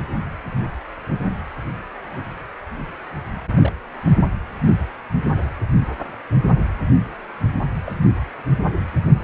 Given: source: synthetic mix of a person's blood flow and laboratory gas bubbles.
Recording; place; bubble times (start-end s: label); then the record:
Doppler ultrasound of blood flow; precordium
3.62-3.73 s: bubbles
7.83-7.92 s: bubbles
From the record:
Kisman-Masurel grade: 121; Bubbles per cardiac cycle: 1 to 2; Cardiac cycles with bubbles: 10 to 50%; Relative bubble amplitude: barely perceptible (0.100 to 0.250); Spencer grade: 2 (many but less than half of the cardiac periods contain bubble signals, singularly or in groups); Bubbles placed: anywhere in the cardiac cycle